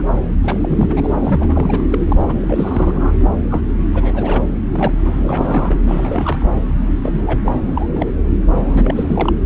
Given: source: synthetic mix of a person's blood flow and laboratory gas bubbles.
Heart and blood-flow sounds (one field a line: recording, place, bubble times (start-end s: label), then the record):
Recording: Doppler ultrasound of blood flow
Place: subclavian vein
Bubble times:
0.00-0.03 s: bubbles
0.16-0.21 s: bubbles
0.44-1.15 s: bubbles
1.23-1.87 s: bubbles
1.91-1.99 s: bubbles
2.04-2.22 s: bubbles
2.27-2.34 s: bubbles
2.41-3.12 s: bubbles
3.49-3.62 s: bubbles
3.94-4.43 s: bubbles
4.72-4.92 s: bubbles
5.05-5.75 s: bubbles
5.88-6.50 s: bubbles
6.55-6.61 s: bubbles
7.03-7.20 s: bubbles
7.26-7.39 s: bubbles
7.44-7.54 s: bubbles
7.64-8.10 s: bubbles
8.54-9.33 s: bubbles
From the record:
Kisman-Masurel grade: 342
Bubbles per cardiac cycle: rolling drumbeat, 9 or more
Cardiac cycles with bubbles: 100%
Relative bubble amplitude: moderate (0.250 to 0.450)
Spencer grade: 3 (all of the cardiac periods contain showers or single bubble signals, but not dominating or overriding the cardiac motion signals)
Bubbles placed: anywhere in the cardiac cycle